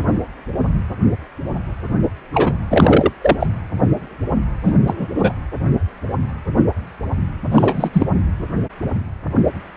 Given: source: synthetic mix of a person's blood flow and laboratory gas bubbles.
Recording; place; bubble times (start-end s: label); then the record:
Doppler ultrasound of blood flow; precordium
2.33-2.58 s: bubbles
2.70-3.10 s: bubbles
3.21-3.47 s: bubbles
4.64-4.75 s: bubbles
4.87-5.08 s: bubbles
5.14-5.33 s: bubbles
7.51-7.89 s: bubbles
7.93-8.06 s: bubbles
From the record:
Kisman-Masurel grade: 223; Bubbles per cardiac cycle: several, 3 to 8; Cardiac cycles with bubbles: 10 to 50%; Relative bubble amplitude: loud (0.450 to 0.775); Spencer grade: 2 (many but less than half of the cardiac periods contain bubble signals, singularly or in groups); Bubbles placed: anywhere in the cardiac cycle